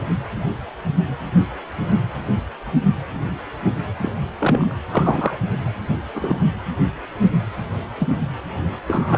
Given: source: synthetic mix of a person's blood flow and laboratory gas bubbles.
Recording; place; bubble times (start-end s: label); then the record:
Doppler ultrasound of blood flow; precordium
3.99-4.14 s: bubbles
4.39-4.72 s: bubbles
4.91-5.37 s: bubbles
6.15-6.40 s: bubbles
8.00-8.08 s: bubbles
8.88-9.18 s: bubbles
From the record:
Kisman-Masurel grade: 123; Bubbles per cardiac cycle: 1 to 2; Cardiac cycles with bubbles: 10 to 50%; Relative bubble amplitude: loud (0.450 to 0.775); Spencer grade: 2 (many but less than half of the cardiac periods contain bubble signals, singularly or in groups); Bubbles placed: anywhere in the cardiac cycle